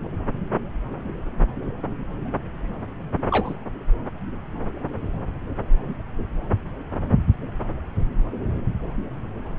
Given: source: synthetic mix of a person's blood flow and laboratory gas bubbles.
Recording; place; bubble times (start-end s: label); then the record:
Doppler ultrasound of blood flow; subclavian vein
3.30-3.55 s: bubbles
From the record:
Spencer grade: 2 (many but less than half of the cardiac periods contain bubble signals, singularly or in groups); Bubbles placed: anywhere in the cardiac cycle